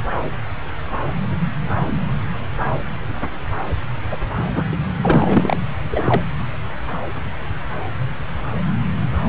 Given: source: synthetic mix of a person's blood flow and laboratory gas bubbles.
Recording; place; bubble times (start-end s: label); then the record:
Doppler ultrasound of blood flow; subclavian vein
4.10-4.18 s: bubbles
4.37-4.43 s: bubbles
4.55-4.64 s: bubbles
4.71-4.77 s: bubbles
5.02-5.57 s: bubbles
5.92-6.22 s: bubbles
From the record:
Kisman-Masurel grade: 223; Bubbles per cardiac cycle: several, 3 to 8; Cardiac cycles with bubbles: 10 to 50%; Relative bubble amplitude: loud (0.450 to 0.775); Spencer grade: 2 (many but less than half of the cardiac periods contain bubble signals, singularly or in groups); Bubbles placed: anywhere in the cardiac cycle